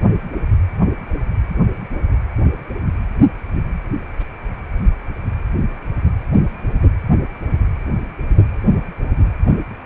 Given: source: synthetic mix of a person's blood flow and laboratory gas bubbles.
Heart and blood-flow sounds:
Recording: Doppler ultrasound of blood flow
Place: precordium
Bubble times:
no bubbles
From the record:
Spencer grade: 0 (complete lack of bubble signals)

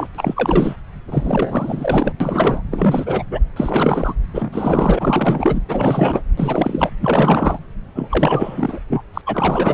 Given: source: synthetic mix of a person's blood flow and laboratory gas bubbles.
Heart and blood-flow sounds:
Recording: Doppler ultrasound of blood flow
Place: subclavian vein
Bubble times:
0.00-0.07 s: bubbles
0.15-0.76 s: bubbles
1.07-2.14 s: bubbles
2.20-2.62 s: bubbles
2.71-3.23 s: bubbles
3.31-3.40 s: bubbles
3.56-4.14 s: bubbles
4.33-5.60 s: bubbles
5.68-6.23 s: bubbles
6.37-6.91 s: bubbles
7.00-7.59 s: bubbles
7.95-8.81 s: bubbles
8.89-9.04 s: bubbles
9.13-9.21 s: bubbles
9.26-9.74 s: bubbles
From the record:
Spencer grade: 4 (maximum detectable bubble signal sounding continuously throughout systole and diastole of every cardiac period, and overriding the amplitude of the normal cardiac signals)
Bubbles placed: anywhere in the cardiac cycle

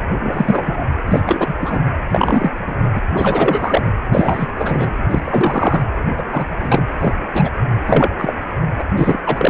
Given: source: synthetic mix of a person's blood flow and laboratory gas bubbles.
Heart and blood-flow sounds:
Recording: Doppler ultrasound of blood flow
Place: precordium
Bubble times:
0.23-0.86 s: bubbles
1.06-1.20 s: bubbles
1.23-1.55 s: bubbles
1.59-1.78 s: bubbles
2.09-2.53 s: bubbles
2.67-2.75 s: bubbles
2.93-2.99 s: bubbles
3.12-3.90 s: bubbles
4.12-4.53 s: bubbles
4.57-4.89 s: bubbles
5.09-5.21 s: bubbles
5.25-5.84 s: bubbles
6.17-6.23 s: bubbles
6.31-6.46 s: bubbles
6.60-6.88 s: bubbles
6.99-7.13 s: bubbles
7.33-7.50 s: bubbles
7.85-8.09 s: bubbles
8.18-8.33 s: bubbles
8.79-8.84 s: bubbles
8.96-9.19 s: bubbles
9.26-9.50 s: bubbles
From the record:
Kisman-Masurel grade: 233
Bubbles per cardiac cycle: several, 3 to 8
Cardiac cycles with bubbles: 50 to 99%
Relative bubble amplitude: loud (0.450 to 0.775)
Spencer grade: 3 (all of the cardiac periods contain showers or single bubble signals, but not dominating or overriding the cardiac motion signals)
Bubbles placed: anywhere in the cardiac cycle

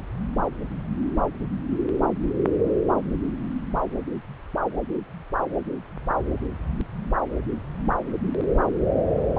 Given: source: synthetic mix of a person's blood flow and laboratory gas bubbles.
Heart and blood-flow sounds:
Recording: Doppler ultrasound of blood flow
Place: subclavian vein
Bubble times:
no bubbles
From the record:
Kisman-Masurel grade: 000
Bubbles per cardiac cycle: 0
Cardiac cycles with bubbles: 0%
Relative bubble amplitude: no bubbles discernible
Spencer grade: 0 (complete lack of bubble signals)

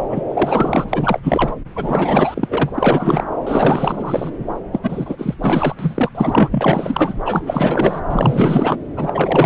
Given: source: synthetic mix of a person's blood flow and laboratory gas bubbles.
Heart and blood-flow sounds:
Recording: Doppler ultrasound of blood flow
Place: subclavian vein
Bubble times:
0.09-0.25 s: bubbles
0.28-0.88 s: bubbles
0.91-1.20 s: bubbles
1.23-1.54 s: bubbles
1.75-2.70 s: bubbles
2.75-3.24 s: bubbles
3.46-4.30 s: bubbles
4.71-4.79 s: bubbles
4.83-5.34 s: bubbles
5.42-5.75 s: bubbles
5.79-6.11 s: bubbles
6.15-7.15 s: bubbles
7.25-8.01 s: bubbles
8.09-8.77 s: bubbles
8.96-9.46 s: bubbles
From the record:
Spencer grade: 4 (maximum detectable bubble signal sounding continuously throughout systole and diastole of every cardiac period, and overriding the amplitude of the normal cardiac signals)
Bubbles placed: anywhere in the cardiac cycle

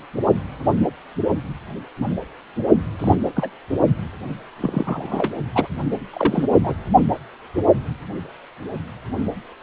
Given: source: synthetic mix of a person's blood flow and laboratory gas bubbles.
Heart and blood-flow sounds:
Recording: Doppler ultrasound of blood flow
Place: precordium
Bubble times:
2.98-3.15 s: bubbles
3.35-3.50 s: bubbles
4.60-5.32 s: bubbles
5.54-5.67 s: bubbles
6.13-6.46 s: bubbles
6.63-6.73 s: bubbles
From the record:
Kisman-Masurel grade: 222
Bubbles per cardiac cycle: several, 3 to 8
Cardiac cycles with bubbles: 10 to 50%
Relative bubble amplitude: moderate (0.250 to 0.450)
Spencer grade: 2 (many but less than half of the cardiac periods contain bubble signals, singularly or in groups)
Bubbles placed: only in the low amplitude regions of the cardiac cycle

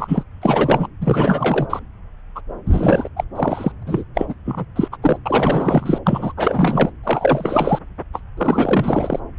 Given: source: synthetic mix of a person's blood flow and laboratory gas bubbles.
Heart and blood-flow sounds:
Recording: Doppler ultrasound of blood flow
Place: subclavian vein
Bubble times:
0.00-0.23 s: bubbles
0.42-0.88 s: bubbles
1.01-1.67 s: bubbles
1.70-1.80 s: bubbles
2.35-2.41 s: bubbles
2.67-3.08 s: bubbles
3.16-3.24 s: bubbles
3.36-3.72 s: bubbles
3.87-4.04 s: bubbles
4.15-4.25 s: bubbles
4.28-4.35 s: bubbles
4.45-4.65 s: bubbles
4.75-4.88 s: bubbles
4.92-4.97 s: bubbles
5.02-5.17 s: bubbles
5.25-5.99 s: bubbles
6.06-6.33 s: bubbles
6.37-6.92 s: bubbles
7.04-7.79 s: bubbles
8.12-8.21 s: bubbles
8.37-9.19 s: bubbles
From the record:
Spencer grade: 4 (maximum detectable bubble signal sounding continuously throughout systole and diastole of every cardiac period, and overriding the amplitude of the normal cardiac signals)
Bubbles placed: anywhere in the cardiac cycle

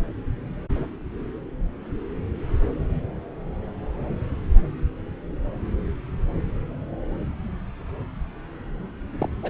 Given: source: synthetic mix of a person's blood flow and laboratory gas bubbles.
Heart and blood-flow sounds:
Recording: Doppler ultrasound of blood flow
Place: subclavian vein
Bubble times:
9.18-9.29 s: bubbles
9.43-9.50 s: bubbles
From the record:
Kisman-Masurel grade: 212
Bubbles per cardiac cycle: several, 3 to 8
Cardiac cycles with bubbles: 1 to 10%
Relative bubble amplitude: moderate (0.250 to 0.450)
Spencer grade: 1 (occasional bubble signal discernible with the cardiac motion signal, with majority of cardiac periods free of bubbles)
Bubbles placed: anywhere in the cardiac cycle

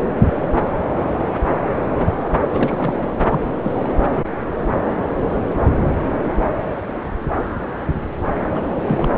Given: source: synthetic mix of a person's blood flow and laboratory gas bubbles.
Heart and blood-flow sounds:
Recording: Doppler ultrasound of blood flow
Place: subclavian vein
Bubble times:
2.50-3.08 s: bubbles
3.29-3.40 s: bubbles
3.46-3.49 s: bubbles
3.62-3.95 s: bubbles
8.54-8.61 s: bubbles
8.75-9.18 s: bubbles
From the record:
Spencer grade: 2 (many but less than half of the cardiac periods contain bubble signals, singularly or in groups)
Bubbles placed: anywhere in the cardiac cycle

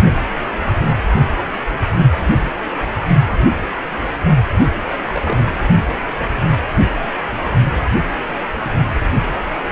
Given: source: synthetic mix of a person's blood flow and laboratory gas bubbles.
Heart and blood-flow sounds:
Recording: Doppler ultrasound of blood flow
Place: precordium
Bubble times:
5.05-5.52 s: bubbles
From the record:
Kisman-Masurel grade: 111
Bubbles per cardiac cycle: 1 to 2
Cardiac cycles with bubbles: 1 to 10%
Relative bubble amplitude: barely perceptible (0.100 to 0.250)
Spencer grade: 1 (occasional bubble signal discernible with the cardiac motion signal, with majority of cardiac periods free of bubbles)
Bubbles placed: only in the low amplitude regions of the cardiac cycle

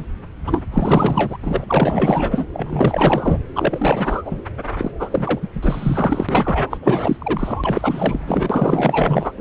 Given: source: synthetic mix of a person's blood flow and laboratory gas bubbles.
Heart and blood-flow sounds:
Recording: Doppler ultrasound of blood flow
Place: subclavian vein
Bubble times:
0.00-0.05 s: bubbles
0.46-0.66 s: bubbles
0.72-1.37 s: bubbles
1.43-1.64 s: bubbles
1.68-2.46 s: bubbles
2.52-3.38 s: bubbles
3.56-4.41 s: bubbles
4.77-4.91 s: bubbles
4.98-5.39 s: bubbles
5.42-5.47 s: bubbles
5.54-6.26 s: bubbles
6.28-6.77 s: bubbles
6.81-9.32 s: bubbles
9.37-9.41 s: bubbles
From the record:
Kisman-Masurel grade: 444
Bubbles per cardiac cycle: continuous sound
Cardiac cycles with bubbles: 100%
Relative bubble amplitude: maximal (0.775 to 0.999)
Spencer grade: 4 (maximum detectable bubble signal sounding continuously throughout systole and diastole of every cardiac period, and overriding the amplitude of the normal cardiac signals)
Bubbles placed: anywhere in the cardiac cycle

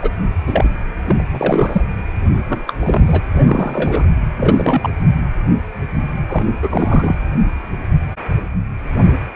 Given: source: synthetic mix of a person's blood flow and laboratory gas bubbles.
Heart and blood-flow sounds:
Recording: Doppler ultrasound of blood flow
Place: precordium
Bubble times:
0.02-0.10 s: bubbles
0.47-0.69 s: bubbles
1.05-1.22 s: bubbles
1.31-1.83 s: bubbles
2.48-2.73 s: bubbles
2.80-3.21 s: bubbles
3.34-4.07 s: bubbles
4.37-4.90 s: bubbles
6.28-6.50 s: bubbles
6.62-7.23 s: bubbles
From the record:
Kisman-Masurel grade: 232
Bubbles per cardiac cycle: several, 3 to 8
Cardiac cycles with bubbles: 50 to 99%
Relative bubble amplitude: moderate (0.250 to 0.450)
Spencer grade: 3 (all of the cardiac periods contain showers or single bubble signals, but not dominating or overriding the cardiac motion signals)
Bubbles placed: anywhere in the cardiac cycle

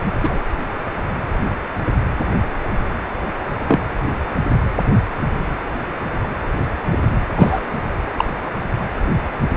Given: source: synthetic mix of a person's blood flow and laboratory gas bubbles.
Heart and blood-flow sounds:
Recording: Doppler ultrasound of blood flow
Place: precordium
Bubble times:
0.22-0.40 s: bubbles
3.67-3.81 s: bubbles
6.91-6.98 s: bubbles
7.36-7.61 s: bubbles
8.16-8.24 s: bubbles
From the record:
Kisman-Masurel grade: 123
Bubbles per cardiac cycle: 1 to 2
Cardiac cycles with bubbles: 10 to 50%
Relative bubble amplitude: loud (0.450 to 0.775)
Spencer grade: 2 (many but less than half of the cardiac periods contain bubble signals, singularly or in groups)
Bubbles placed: anywhere in the cardiac cycle

